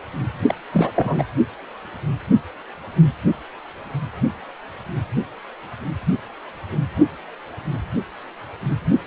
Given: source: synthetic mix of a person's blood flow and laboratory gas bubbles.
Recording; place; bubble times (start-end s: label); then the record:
Doppler ultrasound of blood flow; precordium
0.47-0.55 s: bubbles
0.71-0.91 s: bubbles
0.95-1.23 s: bubbles
From the record:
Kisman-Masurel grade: 212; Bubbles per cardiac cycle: several, 3 to 8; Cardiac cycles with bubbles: 1 to 10%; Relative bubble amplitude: moderate (0.250 to 0.450); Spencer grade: 1 (occasional bubble signal discernible with the cardiac motion signal, with majority of cardiac periods free of bubbles); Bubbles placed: anywhere in the cardiac cycle